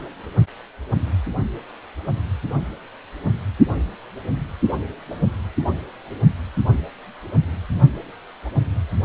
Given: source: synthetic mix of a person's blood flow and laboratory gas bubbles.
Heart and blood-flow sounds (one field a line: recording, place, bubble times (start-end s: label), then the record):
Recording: Doppler ultrasound of blood flow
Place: precordium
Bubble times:
0.00-0.06 s: bubbles
From the record:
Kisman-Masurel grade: 111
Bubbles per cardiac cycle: 1 to 2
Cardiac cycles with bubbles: 1 to 10%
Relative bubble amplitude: barely perceptible (0.100 to 0.250)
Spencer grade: 1 (occasional bubble signal discernible with the cardiac motion signal, with majority of cardiac periods free of bubbles)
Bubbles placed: only in the low amplitude regions of the cardiac cycle